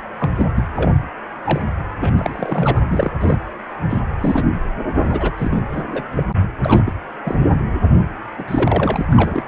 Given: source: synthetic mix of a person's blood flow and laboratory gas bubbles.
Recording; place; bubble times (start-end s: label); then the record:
Doppler ultrasound of blood flow; precordium
0.19-0.30 s: bubbles
0.38-0.47 s: bubbles
0.55-0.63 s: bubbles
0.76-0.92 s: bubbles
1.44-1.61 s: bubbles
2.00-2.13 s: bubbles
2.19-2.82 s: bubbles
2.88-3.10 s: bubbles
3.21-3.38 s: bubbles
3.90-4.00 s: bubbles
4.21-4.46 s: bubbles
5.02-5.32 s: bubbles
5.37-5.62 s: bubbles
5.72-5.83 s: bubbles
5.91-6.03 s: bubbles
6.14-6.24 s: bubbles
6.63-6.93 s: bubbles
7.24-7.35 s: bubbles
8.38-8.44 s: bubbles
8.47-9.05 s: bubbles
9.12-9.43 s: bubbles
From the record:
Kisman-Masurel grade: 242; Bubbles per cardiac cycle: several, 3 to 8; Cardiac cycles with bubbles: 100%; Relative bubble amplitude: moderate (0.250 to 0.450); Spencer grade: 3 (all of the cardiac periods contain showers or single bubble signals, but not dominating or overriding the cardiac motion signals); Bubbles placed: anywhere in the cardiac cycle